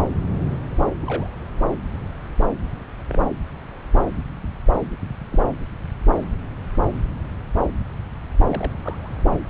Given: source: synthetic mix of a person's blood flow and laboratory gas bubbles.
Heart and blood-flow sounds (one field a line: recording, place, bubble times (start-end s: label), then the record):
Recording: Doppler ultrasound of blood flow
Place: subclavian vein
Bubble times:
1.00-1.28 s: bubbles
3.08-3.28 s: bubbles
5.31-5.39 s: bubbles
8.47-9.15 s: bubbles
From the record:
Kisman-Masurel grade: 121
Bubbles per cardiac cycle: 1 to 2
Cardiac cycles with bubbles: 10 to 50%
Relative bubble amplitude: barely perceptible (0.100 to 0.250)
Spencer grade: 2 (many but less than half of the cardiac periods contain bubble signals, singularly or in groups)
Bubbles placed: anywhere in the cardiac cycle